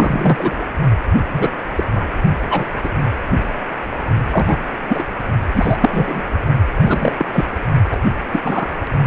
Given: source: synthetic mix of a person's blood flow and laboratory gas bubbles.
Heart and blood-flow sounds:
Doppler ultrasound of blood flow; precordium
0.00-0.63 s: bubbles
1.32-1.51 s: bubbles
1.75-1.83 s: bubbles
1.95-2.04 s: bubbles
2.50-2.66 s: bubbles
2.83-2.89 s: bubbles
4.31-4.57 s: bubbles
4.88-5.03 s: bubbles
5.53-5.77 s: bubbles
5.80-6.22 s: bubbles
6.81-7.12 s: bubbles
7.18-7.25 s: bubbles
7.32-7.45 s: bubbles
7.91-7.97 s: bubbles
8.32-8.41 s: bubbles
8.44-8.68 s: bubbles
From the record:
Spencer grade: 3 (all of the cardiac periods contain showers or single bubble signals, but not dominating or overriding the cardiac motion signals); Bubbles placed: only in the low amplitude regions of the cardiac cycle

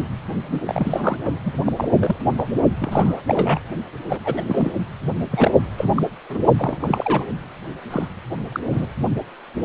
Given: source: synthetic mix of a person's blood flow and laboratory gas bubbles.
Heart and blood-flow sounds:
Doppler ultrasound of blood flow; precordium
0.48-0.60 s: bubbles
0.66-1.17 s: bubbles
1.24-1.38 s: bubbles
1.45-1.53 s: bubbles
1.65-1.73 s: bubbles
1.76-1.89 s: bubbles
1.98-2.16 s: bubbles
2.37-2.62 s: bubbles
2.79-3.22 s: bubbles
3.25-3.59 s: bubbles
4.09-4.19 s: bubbles
4.24-4.45 s: bubbles
4.47-4.71 s: bubbles
5.30-5.51 s: bubbles
5.78-5.88 s: bubbles
5.95-6.04 s: bubbles
6.29-6.46 s: bubbles
6.57-7.25 s: bubbles
7.91-8.07 s: bubbles
8.52-8.60 s: bubbles
8.72-8.87 s: bubbles
From the record:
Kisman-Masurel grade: 232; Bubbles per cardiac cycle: several, 3 to 8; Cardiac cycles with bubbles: 50 to 99%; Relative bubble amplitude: moderate (0.250 to 0.450); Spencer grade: 3 (all of the cardiac periods contain showers or single bubble signals, but not dominating or overriding the cardiac motion signals); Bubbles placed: only in the low amplitude regions of the cardiac cycle

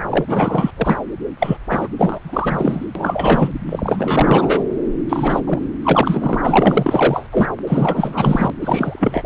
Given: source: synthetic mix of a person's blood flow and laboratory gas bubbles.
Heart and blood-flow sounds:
Doppler ultrasound of blood flow; subclavian vein
0.11-0.71 s: bubbles
0.77-0.99 s: bubbles
1.39-1.57 s: bubbles
1.69-1.89 s: bubbles
1.97-2.19 s: bubbles
2.23-2.86 s: bubbles
2.95-3.51 s: bubbles
3.70-4.64 s: bubbles
5.09-5.40 s: bubbles
5.46-5.59 s: bubbles
5.84-6.36 s: bubbles
6.41-7.27 s: bubbles
7.32-7.47 s: bubbles
7.67-8.52 s: bubbles
8.61-9.22 s: bubbles
From the record:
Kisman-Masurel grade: 444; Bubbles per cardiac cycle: continuous sound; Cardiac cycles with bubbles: 100%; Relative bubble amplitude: maximal (0.775 to 0.999); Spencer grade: 4 (maximum detectable bubble signal sounding continuously throughout systole and diastole of every cardiac period, and overriding the amplitude of the normal cardiac signals); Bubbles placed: anywhere in the cardiac cycle

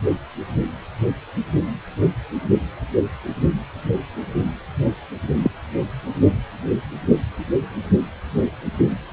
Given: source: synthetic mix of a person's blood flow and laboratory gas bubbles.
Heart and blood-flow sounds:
Doppler ultrasound of blood flow; precordium
5.42-5.50 s: bubbles
From the record:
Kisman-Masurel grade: 112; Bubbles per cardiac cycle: 1 to 2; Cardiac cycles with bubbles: 1 to 10%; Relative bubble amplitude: moderate (0.250 to 0.450); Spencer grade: 1 (occasional bubble signal discernible with the cardiac motion signal, with majority of cardiac periods free of bubbles); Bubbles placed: only in the low amplitude regions of the cardiac cycle

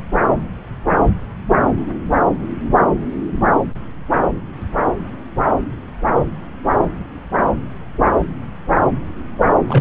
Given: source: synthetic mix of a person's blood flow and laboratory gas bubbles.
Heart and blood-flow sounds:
Doppler ultrasound of blood flow; subclavian vein
9.67-9.81 s: bubbles
From the record:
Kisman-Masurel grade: 113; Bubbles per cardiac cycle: 1 to 2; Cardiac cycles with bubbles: 1 to 10%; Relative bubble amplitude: loud (0.450 to 0.775); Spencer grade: 1 (occasional bubble signal discernible with the cardiac motion signal, with majority of cardiac periods free of bubbles); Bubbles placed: anywhere in the cardiac cycle

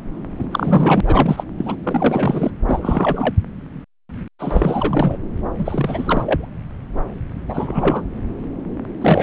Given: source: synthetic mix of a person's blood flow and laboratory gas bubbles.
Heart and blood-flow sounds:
Doppler ultrasound of blood flow; subclavian vein
0.39-0.47 s: bubbles
0.51-1.00 s: bubbles
1.06-1.44 s: bubbles
1.58-1.76 s: bubbles
1.83-2.51 s: bubbles
2.69-3.35 s: bubbles
4.39-5.20 s: bubbles
5.58-6.47 s: bubbles
7.47-8.04 s: bubbles
9.01-9.23 s: bubbles
From the record:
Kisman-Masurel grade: 333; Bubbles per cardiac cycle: rolling drumbeat, 9 or more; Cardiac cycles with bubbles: 50 to 99%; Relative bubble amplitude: loud (0.450 to 0.775); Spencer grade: 3 (all of the cardiac periods contain showers or single bubble signals, but not dominating or overriding the cardiac motion signals); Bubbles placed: anywhere in the cardiac cycle

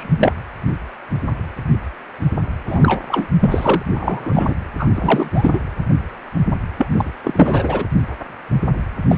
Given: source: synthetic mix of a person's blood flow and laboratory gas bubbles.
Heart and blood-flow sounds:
Doppler ultrasound of blood flow; precordium
0.00-0.33 s: bubbles
2.67-3.00 s: bubbles
3.08-3.27 s: bubbles
3.40-3.83 s: bubbles
3.92-4.55 s: bubbles
4.79-4.89 s: bubbles
4.95-5.30 s: bubbles
5.33-5.59 s: bubbles
6.78-6.87 s: bubbles
6.92-7.11 s: bubbles
7.24-7.86 s: bubbles
9.08-9.17 s: bubbles
From the record:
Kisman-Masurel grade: 233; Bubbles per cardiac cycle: several, 3 to 8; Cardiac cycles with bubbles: 50 to 99%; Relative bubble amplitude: loud (0.450 to 0.775); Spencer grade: 3 (all of the cardiac periods contain showers or single bubble signals, but not dominating or overriding the cardiac motion signals); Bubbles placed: anywhere in the cardiac cycle

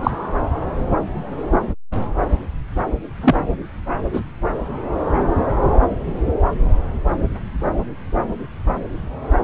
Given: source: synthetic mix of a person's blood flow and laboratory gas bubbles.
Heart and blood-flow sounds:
Doppler ultrasound of blood flow; subclavian vein
0.03-0.11 s: bubbles
3.21-3.45 s: bubbles
4.13-4.21 s: bubbles
From the record:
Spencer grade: 2 (many but less than half of the cardiac periods contain bubble signals, singularly or in groups); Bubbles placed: anywhere in the cardiac cycle

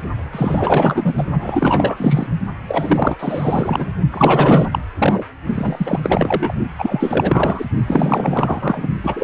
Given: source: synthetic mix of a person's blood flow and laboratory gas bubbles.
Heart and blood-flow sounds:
Doppler ultrasound of blood flow; precordium
0.32-1.14 s: bubbles
1.17-1.24 s: bubbles
1.40-2.27 s: bubbles
2.68-3.91 s: bubbles
4.12-4.67 s: bubbles
4.71-4.79 s: bubbles
4.98-5.25 s: bubbles
5.54-6.00 s: bubbles
6.03-6.54 s: bubbles
6.79-7.65 s: bubbles
7.86-8.88 s: bubbles
9.03-9.24 s: bubbles
From the record:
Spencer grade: 4 (maximum detectable bubble signal sounding continuously throughout systole and diastole of every cardiac period, and overriding the amplitude of the normal cardiac signals); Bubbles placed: only in the low amplitude regions of the cardiac cycle

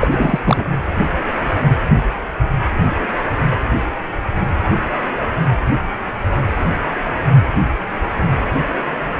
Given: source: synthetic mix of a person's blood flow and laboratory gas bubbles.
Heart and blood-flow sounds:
Doppler ultrasound of blood flow; precordium
0.00-0.40 s: bubbles
0.45-0.65 s: bubbles
From the record:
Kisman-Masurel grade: 213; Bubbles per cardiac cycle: several, 3 to 8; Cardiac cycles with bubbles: 1 to 10%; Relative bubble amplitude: loud (0.450 to 0.775); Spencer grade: 1 (occasional bubble signal discernible with the cardiac motion signal, with majority of cardiac periods free of bubbles); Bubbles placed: anywhere in the cardiac cycle

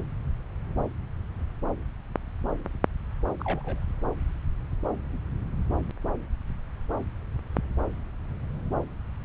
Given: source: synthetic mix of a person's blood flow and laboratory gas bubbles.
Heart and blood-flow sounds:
Doppler ultrasound of blood flow; subclavian vein
3.40-3.84 s: bubbles
From the record:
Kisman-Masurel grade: 111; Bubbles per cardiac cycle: 1 to 2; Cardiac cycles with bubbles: 1 to 10%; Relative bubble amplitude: barely perceptible (0.100 to 0.250); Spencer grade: 1 (occasional bubble signal discernible with the cardiac motion signal, with majority of cardiac periods free of bubbles); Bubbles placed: anywhere in the cardiac cycle

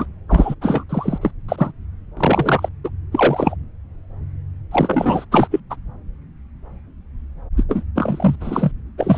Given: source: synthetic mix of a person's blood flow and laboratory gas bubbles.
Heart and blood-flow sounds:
Doppler ultrasound of blood flow; subclavian vein
0.00-0.05 s: bubbles
0.28-0.55 s: bubbles
0.61-0.84 s: bubbles
0.89-1.18 s: bubbles
1.21-1.31 s: bubbles
1.48-1.71 s: bubbles
2.17-2.69 s: bubbles
2.84-2.90 s: bubbles
3.11-3.55 s: bubbles
4.71-5.25 s: bubbles
5.31-5.47 s: bubbles
5.51-5.60 s: bubbles
5.70-5.76 s: bubbles
7.56-7.63 s: bubbles
7.69-7.83 s: bubbles
7.95-8.36 s: bubbles
8.40-8.71 s: bubbles
8.97-9.18 s: bubbles
From the record:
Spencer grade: 3 (all of the cardiac periods contain showers or single bubble signals, but not dominating or overriding the cardiac motion signals); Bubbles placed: anywhere in the cardiac cycle

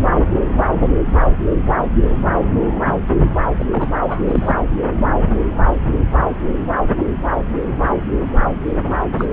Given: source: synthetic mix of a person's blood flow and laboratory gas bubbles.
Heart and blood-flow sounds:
Doppler ultrasound of blood flow; subclavian vein
3.59-3.64 s: bubbles
3.70-3.89 s: bubbles
4.07-4.24 s: bubbles
4.27-4.56 s: bubbles
9.18-9.26 s: bubbles
From the record:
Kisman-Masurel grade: 222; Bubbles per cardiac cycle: several, 3 to 8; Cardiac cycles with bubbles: 10 to 50%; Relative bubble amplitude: moderate (0.250 to 0.450); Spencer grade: 2 (many but less than half of the cardiac periods contain bubble signals, singularly or in groups); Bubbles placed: anywhere in the cardiac cycle

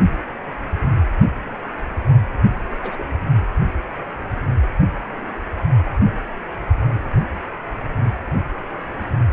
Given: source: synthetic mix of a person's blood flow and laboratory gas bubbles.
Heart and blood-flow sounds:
Doppler ultrasound of blood flow; precordium
2.73-3.09 s: bubbles
From the record:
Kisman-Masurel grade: 111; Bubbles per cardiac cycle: 1 to 2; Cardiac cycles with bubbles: 1 to 10%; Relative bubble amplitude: barely perceptible (0.100 to 0.250); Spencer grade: 1 (occasional bubble signal discernible with the cardiac motion signal, with majority of cardiac periods free of bubbles); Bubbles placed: anywhere in the cardiac cycle

